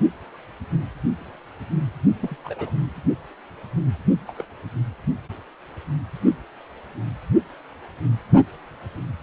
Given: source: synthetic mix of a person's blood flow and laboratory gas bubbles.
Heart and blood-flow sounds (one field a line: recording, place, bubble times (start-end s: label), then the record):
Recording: Doppler ultrasound of blood flow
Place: precordium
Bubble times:
2.23-2.36 s: bubbles
2.44-2.73 s: bubbles
4.28-4.33 s: bubbles
4.35-4.45 s: bubbles
From the record:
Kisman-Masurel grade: 121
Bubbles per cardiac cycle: 1 to 2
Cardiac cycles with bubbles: 10 to 50%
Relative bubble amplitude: barely perceptible (0.100 to 0.250)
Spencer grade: 2 (many but less than half of the cardiac periods contain bubble signals, singularly or in groups)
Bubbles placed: only in the low amplitude regions of the cardiac cycle